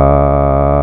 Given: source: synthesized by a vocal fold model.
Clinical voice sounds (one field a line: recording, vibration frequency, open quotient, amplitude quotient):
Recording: sustained vowel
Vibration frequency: 70 Hz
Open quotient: 0.5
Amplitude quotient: 1